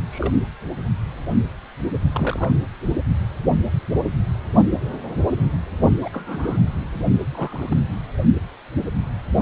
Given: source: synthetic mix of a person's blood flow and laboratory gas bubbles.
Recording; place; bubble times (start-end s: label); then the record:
Doppler ultrasound of blood flow; precordium
0.11-0.34 s: bubbles
2.12-2.67 s: bubbles
6.02-6.62 s: bubbles
7.31-7.77 s: bubbles
From the record:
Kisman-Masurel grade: 221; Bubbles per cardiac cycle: several, 3 to 8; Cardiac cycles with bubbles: 10 to 50%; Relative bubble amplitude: barely perceptible (0.100 to 0.250); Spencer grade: 2 (many but less than half of the cardiac periods contain bubble signals, singularly or in groups); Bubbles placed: only in the low amplitude regions of the cardiac cycle